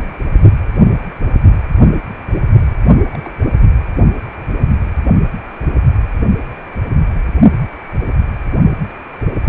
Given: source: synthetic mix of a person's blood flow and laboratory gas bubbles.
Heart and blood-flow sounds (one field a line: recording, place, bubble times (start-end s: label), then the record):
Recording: Doppler ultrasound of blood flow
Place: precordium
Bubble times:
3.14-3.19 s: bubbles
3.24-3.31 s: bubbles
3.84-3.87 s: bubbles
From the record:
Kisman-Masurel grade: 211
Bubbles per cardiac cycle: several, 3 to 8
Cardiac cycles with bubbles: 1 to 10%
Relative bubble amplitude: barely perceptible (0.100 to 0.250)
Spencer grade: 1 (occasional bubble signal discernible with the cardiac motion signal, with majority of cardiac periods free of bubbles)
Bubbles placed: only in the low amplitude regions of the cardiac cycle